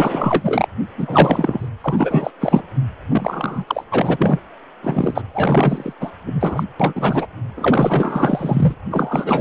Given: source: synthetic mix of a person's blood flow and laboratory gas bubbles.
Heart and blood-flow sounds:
Doppler ultrasound of blood flow; precordium
0.00-0.66 s: bubbles
0.97-1.69 s: bubbles
1.81-2.30 s: bubbles
2.40-2.61 s: bubbles
3.09-3.84 s: bubbles
3.90-4.39 s: bubbles
4.83-5.22 s: bubbles
5.33-5.94 s: bubbles
6.00-6.12 s: bubbles
6.25-6.64 s: bubbles
6.79-7.27 s: bubbles
7.57-8.75 s: bubbles
8.90-9.41 s: bubbles
From the record:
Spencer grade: 4 (maximum detectable bubble signal sounding continuously throughout systole and diastole of every cardiac period, and overriding the amplitude of the normal cardiac signals); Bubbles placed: anywhere in the cardiac cycle

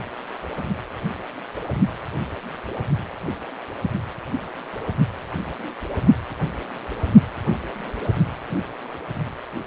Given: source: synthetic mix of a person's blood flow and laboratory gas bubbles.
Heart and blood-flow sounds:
Doppler ultrasound of blood flow; precordium
no bubbles
From the record:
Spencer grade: 0 (complete lack of bubble signals)

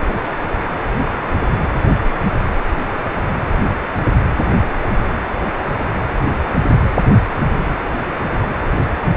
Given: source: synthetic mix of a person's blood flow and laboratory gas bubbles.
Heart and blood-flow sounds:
Doppler ultrasound of blood flow; precordium
9.02-9.07 s: bubbles
From the record:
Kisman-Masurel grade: 112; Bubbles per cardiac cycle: 1 to 2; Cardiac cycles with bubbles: 1 to 10%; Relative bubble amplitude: moderate (0.250 to 0.450); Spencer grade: 1 (occasional bubble signal discernible with the cardiac motion signal, with majority of cardiac periods free of bubbles); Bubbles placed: anywhere in the cardiac cycle

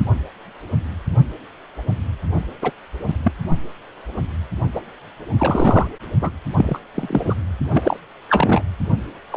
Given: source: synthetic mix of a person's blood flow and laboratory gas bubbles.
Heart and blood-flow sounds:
Doppler ultrasound of blood flow; precordium
2.62-2.71 s: bubbles
3.08-3.15 s: bubbles
3.22-3.32 s: bubbles
4.75-4.81 s: bubbles
5.39-5.91 s: bubbles
6.21-6.31 s: bubbles
6.57-6.79 s: bubbles
6.95-7.35 s: bubbles
7.69-7.97 s: bubbles
8.29-8.62 s: bubbles
9.32-9.37 s: bubbles
From the record:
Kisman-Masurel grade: 233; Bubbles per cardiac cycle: several, 3 to 8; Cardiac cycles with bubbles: 50 to 99%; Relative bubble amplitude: loud (0.450 to 0.775); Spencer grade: 3 (all of the cardiac periods contain showers or single bubble signals, but not dominating or overriding the cardiac motion signals); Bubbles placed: only in the low amplitude regions of the cardiac cycle

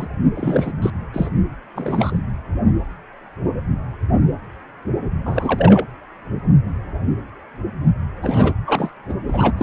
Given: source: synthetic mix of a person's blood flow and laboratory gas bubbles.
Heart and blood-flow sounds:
Doppler ultrasound of blood flow; precordium
0.00-0.07 s: bubbles
0.34-0.72 s: bubbles
0.82-0.90 s: bubbles
1.13-1.29 s: bubbles
1.75-2.19 s: bubbles
5.25-5.86 s: bubbles
8.22-8.54 s: bubbles
8.65-8.91 s: bubbles
9.08-9.14 s: bubbles
9.27-9.52 s: bubbles
9.57-9.63 s: bubbles
From the record:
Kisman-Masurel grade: 222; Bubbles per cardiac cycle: several, 3 to 8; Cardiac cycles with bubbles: 10 to 50%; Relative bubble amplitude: moderate (0.250 to 0.450); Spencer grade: 2 (many but less than half of the cardiac periods contain bubble signals, singularly or in groups); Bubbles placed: anywhere in the cardiac cycle

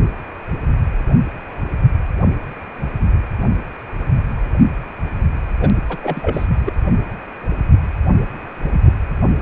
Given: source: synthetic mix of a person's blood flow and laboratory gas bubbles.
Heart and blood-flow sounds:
Doppler ultrasound of blood flow; precordium
5.60-5.70 s: bubbles
5.88-5.98 s: bubbles
6.02-6.46 s: bubbles
6.65-6.72 s: bubbles
From the record:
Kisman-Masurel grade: 223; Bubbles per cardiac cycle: several, 3 to 8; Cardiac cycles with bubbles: 10 to 50%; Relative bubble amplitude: loud (0.450 to 0.775); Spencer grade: 2 (many but less than half of the cardiac periods contain bubble signals, singularly or in groups); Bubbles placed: anywhere in the cardiac cycle

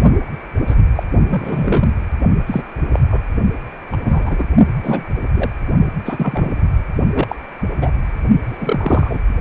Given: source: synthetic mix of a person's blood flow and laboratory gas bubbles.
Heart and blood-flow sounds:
Doppler ultrasound of blood flow; precordium
0.67-0.75 s: bubbles
0.95-1.03 s: bubbles
1.19-1.94 s: bubbles
2.46-2.63 s: bubbles
2.93-3.00 s: bubbles
3.10-3.21 s: bubbles
3.90-4.44 s: bubbles
4.81-5.05 s: bubbles
5.34-5.50 s: bubbles
6.05-6.59 s: bubbles
7.14-7.35 s: bubbles
7.81-7.91 s: bubbles
8.41-9.20 s: bubbles
From the record:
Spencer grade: 3 (all of the cardiac periods contain showers or single bubble signals, but not dominating or overriding the cardiac motion signals); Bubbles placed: only in the low amplitude regions of the cardiac cycle

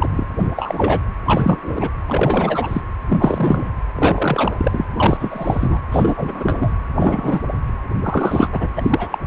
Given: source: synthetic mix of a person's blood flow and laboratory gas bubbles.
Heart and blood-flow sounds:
Doppler ultrasound of blood flow; precordium
0.00-0.26 s: bubbles
0.39-0.47 s: bubbles
0.56-1.00 s: bubbles
1.25-1.89 s: bubbles
2.08-2.81 s: bubbles
3.10-3.71 s: bubbles
3.95-4.86 s: bubbles
4.96-5.17 s: bubbles
5.20-5.79 s: bubbles
5.91-6.69 s: bubbles
6.95-7.42 s: bubbles
8.03-8.48 s: bubbles
8.52-8.72 s: bubbles
8.76-9.18 s: bubbles
From the record:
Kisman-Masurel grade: 343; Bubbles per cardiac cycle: rolling drumbeat, 9 or more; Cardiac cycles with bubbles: 100%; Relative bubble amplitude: loud (0.450 to 0.775); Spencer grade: 3 (all of the cardiac periods contain showers or single bubble signals, but not dominating or overriding the cardiac motion signals); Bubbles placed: anywhere in the cardiac cycle

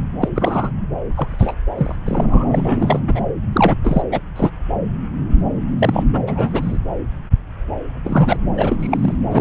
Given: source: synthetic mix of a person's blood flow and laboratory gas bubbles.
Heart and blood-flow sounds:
Doppler ultrasound of blood flow; subclavian vein
0.22-0.29 s: bubbles
0.35-0.71 s: bubbles
1.14-1.55 s: bubbles
1.77-1.95 s: bubbles
2.06-3.00 s: bubbles
3.07-3.20 s: bubbles
3.53-3.75 s: bubbles
3.84-4.03 s: bubbles
4.12-4.21 s: bubbles
4.36-4.50 s: bubbles
5.79-6.04 s: bubbles
6.12-6.78 s: bubbles
8.04-8.36 s: bubbles
8.57-8.76 s: bubbles
8.79-9.15 s: bubbles
9.30-9.41 s: bubbles
From the record:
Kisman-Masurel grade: 233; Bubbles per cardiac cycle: several, 3 to 8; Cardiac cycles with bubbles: 50 to 99%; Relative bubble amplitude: loud (0.450 to 0.775); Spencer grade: 3 (all of the cardiac periods contain showers or single bubble signals, but not dominating or overriding the cardiac motion signals); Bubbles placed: anywhere in the cardiac cycle

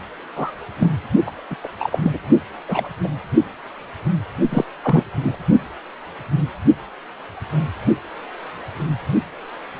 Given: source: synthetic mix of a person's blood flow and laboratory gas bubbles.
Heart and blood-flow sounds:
Doppler ultrasound of blood flow; precordium
0.35-0.52 s: bubbles
0.79-0.89 s: bubbles
1.26-1.30 s: bubbles
1.50-1.55 s: bubbles
1.63-1.67 s: bubbles
1.79-1.98 s: bubbles
2.02-2.19 s: bubbles
2.68-2.88 s: bubbles
3.03-3.08 s: bubbles
4.51-4.65 s: bubbles
4.83-5.03 s: bubbles
5.23-5.39 s: bubbles
From the record:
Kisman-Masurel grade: 232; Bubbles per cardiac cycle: several, 3 to 8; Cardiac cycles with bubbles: 50 to 99%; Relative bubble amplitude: moderate (0.250 to 0.450); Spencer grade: 3 (all of the cardiac periods contain showers or single bubble signals, but not dominating or overriding the cardiac motion signals); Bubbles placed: only in the low amplitude regions of the cardiac cycle

